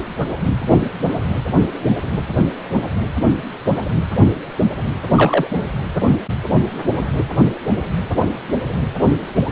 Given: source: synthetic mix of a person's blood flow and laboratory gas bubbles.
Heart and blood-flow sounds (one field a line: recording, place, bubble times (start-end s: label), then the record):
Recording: Doppler ultrasound of blood flow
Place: precordium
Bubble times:
5.15-5.47 s: bubbles
From the record:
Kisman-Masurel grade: 212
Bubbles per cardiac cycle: several, 3 to 8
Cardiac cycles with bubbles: 1 to 10%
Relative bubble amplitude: moderate (0.250 to 0.450)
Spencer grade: 1 (occasional bubble signal discernible with the cardiac motion signal, with majority of cardiac periods free of bubbles)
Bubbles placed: anywhere in the cardiac cycle